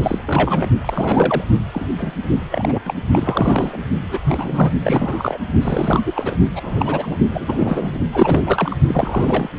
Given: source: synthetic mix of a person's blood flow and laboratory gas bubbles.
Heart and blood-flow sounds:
Doppler ultrasound of blood flow; precordium
0.02-0.23 s: bubbles
0.27-0.69 s: bubbles
0.81-1.44 s: bubbles
1.73-1.88 s: bubbles
1.99-2.14 s: bubbles
2.51-2.79 s: bubbles
2.85-2.94 s: bubbles
3.11-3.77 s: bubbles
4.02-4.20 s: bubbles
4.23-4.71 s: bubbles
4.81-5.38 s: bubbles
5.61-6.02 s: bubbles
6.05-6.38 s: bubbles
6.55-7.18 s: bubbles
7.30-7.98 s: bubbles
8.12-8.76 s: bubbles
8.88-9.48 s: bubbles
From the record:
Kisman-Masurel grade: 332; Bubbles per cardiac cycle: rolling drumbeat, 9 or more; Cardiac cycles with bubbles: 50 to 99%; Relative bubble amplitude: moderate (0.250 to 0.450); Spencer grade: 3 (all of the cardiac periods contain showers or single bubble signals, but not dominating or overriding the cardiac motion signals); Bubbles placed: only in the low amplitude regions of the cardiac cycle

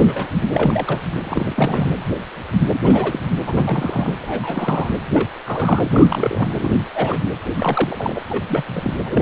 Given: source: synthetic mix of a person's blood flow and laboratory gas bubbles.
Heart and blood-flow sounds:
Doppler ultrasound of blood flow; precordium
0.00-0.27 s: bubbles
0.41-0.46 s: bubbles
0.52-1.01 s: bubbles
1.24-1.93 s: bubbles
2.83-3.20 s: bubbles
3.46-4.12 s: bubbles
4.22-4.89 s: bubbles
5.12-5.26 s: bubbles
5.45-5.81 s: bubbles
5.93-6.47 s: bubbles
6.57-6.75 s: bubbles
6.95-7.19 s: bubbles
7.56-8.20 s: bubbles
8.29-8.46 s: bubbles
8.48-8.63 s: bubbles
8.66-8.94 s: bubbles
9.05-9.22 s: bubbles
From the record:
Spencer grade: 3 (all of the cardiac periods contain showers or single bubble signals, but not dominating or overriding the cardiac motion signals); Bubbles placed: anywhere in the cardiac cycle

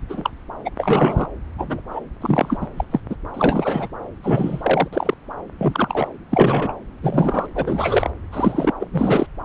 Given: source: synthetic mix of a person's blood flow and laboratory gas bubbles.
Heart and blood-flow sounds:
Doppler ultrasound of blood flow; subclavian vein
0.09-0.30 s: bubbles
0.65-0.70 s: bubbles
0.77-1.27 s: bubbles
1.58-1.82 s: bubbles
1.91-2.00 s: bubbles
2.21-2.58 s: bubbles
2.61-2.68 s: bubbles
2.76-2.84 s: bubbles
2.91-3.00 s: bubbles
3.09-3.16 s: bubbles
3.33-3.88 s: bubbles
4.23-4.88 s: bubbles
4.92-5.14 s: bubbles
5.58-6.08 s: bubbles
6.30-6.73 s: bubbles
7.02-7.46 s: bubbles
7.54-8.10 s: bubbles
8.32-8.73 s: bubbles
8.79-8.87 s: bubbles
8.92-9.27 s: bubbles
From the record:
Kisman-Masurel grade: 243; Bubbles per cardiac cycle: several, 3 to 8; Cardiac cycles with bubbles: 100%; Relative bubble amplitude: loud (0.450 to 0.775); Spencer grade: 3 (all of the cardiac periods contain showers or single bubble signals, but not dominating or overriding the cardiac motion signals); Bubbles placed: anywhere in the cardiac cycle

